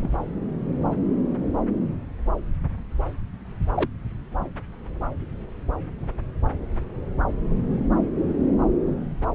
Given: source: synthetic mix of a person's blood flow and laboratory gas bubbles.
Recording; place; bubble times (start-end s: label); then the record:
Doppler ultrasound of blood flow; subclavian vein
0.00-0.09 s: bubbles
3.70-3.87 s: bubbles
From the record:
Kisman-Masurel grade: 122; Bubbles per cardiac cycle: 1 to 2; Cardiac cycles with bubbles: 10 to 50%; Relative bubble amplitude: moderate (0.250 to 0.450); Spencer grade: 2 (many but less than half of the cardiac periods contain bubble signals, singularly or in groups); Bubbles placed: anywhere in the cardiac cycle